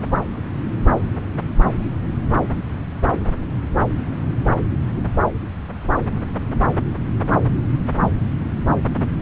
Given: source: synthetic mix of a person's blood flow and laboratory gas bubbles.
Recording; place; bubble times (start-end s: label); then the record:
Doppler ultrasound of blood flow; subclavian vein
no bubbles
From the record:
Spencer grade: 0 (complete lack of bubble signals)